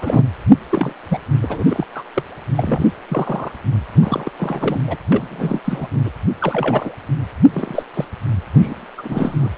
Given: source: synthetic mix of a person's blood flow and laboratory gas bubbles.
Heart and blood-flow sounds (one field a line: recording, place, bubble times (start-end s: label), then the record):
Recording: Doppler ultrasound of blood flow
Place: precordium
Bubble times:
0.02-0.24 s: bubbles
0.70-0.93 s: bubbles
1.09-1.19 s: bubbles
1.42-1.85 s: bubbles
1.95-2.03 s: bubbles
2.13-2.23 s: bubbles
2.56-2.92 s: bubbles
3.08-3.51 s: bubbles
3.93-4.30 s: bubbles
4.38-4.79 s: bubbles
4.87-4.96 s: bubbles
5.12-5.60 s: bubbles
5.64-5.87 s: bubbles
5.93-6.00 s: bubbles
6.05-6.10 s: bubbles
6.40-6.92 s: bubbles
7.54-7.83 s: bubbles
7.93-8.05 s: bubbles
8.54-8.86 s: bubbles
8.98-9.50 s: bubbles
From the record:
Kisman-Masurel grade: 242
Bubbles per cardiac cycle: several, 3 to 8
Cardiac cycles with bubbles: 100%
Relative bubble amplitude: moderate (0.250 to 0.450)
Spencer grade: 3 (all of the cardiac periods contain showers or single bubble signals, but not dominating or overriding the cardiac motion signals)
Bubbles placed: anywhere in the cardiac cycle